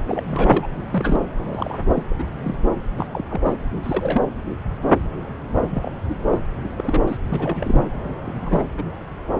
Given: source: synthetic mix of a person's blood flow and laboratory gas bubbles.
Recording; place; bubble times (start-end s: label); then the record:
Doppler ultrasound of blood flow; subclavian vein
0.07-0.71 s: bubbles
0.91-1.20 s: bubbles
1.38-1.78 s: bubbles
1.87-2.03 s: bubbles
2.10-2.14 s: bubbles
2.18-2.24 s: bubbles
2.44-2.55 s: bubbles
2.97-3.07 s: bubbles
3.12-3.24 s: bubbles
3.30-3.41 s: bubbles
3.44-3.53 s: bubbles
3.83-4.22 s: bubbles
5.60-5.92 s: bubbles
6.08-6.17 s: bubbles
6.29-6.38 s: bubbles
6.63-6.69 s: bubbles
6.77-7.02 s: bubbles
7.08-7.17 s: bubbles
7.29-7.89 s: bubbles
8.25-8.63 s: bubbles
8.74-8.82 s: bubbles
From the record:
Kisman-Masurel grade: 232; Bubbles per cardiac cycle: several, 3 to 8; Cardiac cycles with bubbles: 50 to 99%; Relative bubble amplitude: moderate (0.250 to 0.450); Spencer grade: 3 (all of the cardiac periods contain showers or single bubble signals, but not dominating or overriding the cardiac motion signals); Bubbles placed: anywhere in the cardiac cycle